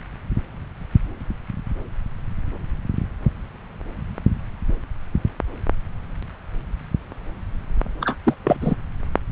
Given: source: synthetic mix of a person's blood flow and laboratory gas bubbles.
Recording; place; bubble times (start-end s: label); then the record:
Doppler ultrasound of blood flow; subclavian vein
8.01-8.16 s: bubbles
8.23-8.34 s: bubbles
8.44-8.75 s: bubbles
From the record:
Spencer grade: 1 (occasional bubble signal discernible with the cardiac motion signal, with majority of cardiac periods free of bubbles); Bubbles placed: anywhere in the cardiac cycle